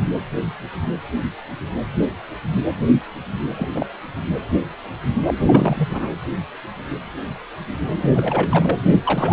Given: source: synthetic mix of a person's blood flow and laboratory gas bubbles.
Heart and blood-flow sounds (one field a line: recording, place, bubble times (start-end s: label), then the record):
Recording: Doppler ultrasound of blood flow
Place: precordium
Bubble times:
3.57-3.68 s: bubbles
3.75-3.86 s: bubbles
5.25-5.34 s: bubbles
5.39-6.10 s: bubbles
7.98-8.78 s: bubbles
9.04-9.33 s: bubbles
From the record:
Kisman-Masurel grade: 223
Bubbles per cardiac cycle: several, 3 to 8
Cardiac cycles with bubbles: 10 to 50%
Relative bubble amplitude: loud (0.450 to 0.775)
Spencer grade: 2 (many but less than half of the cardiac periods contain bubble signals, singularly or in groups)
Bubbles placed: anywhere in the cardiac cycle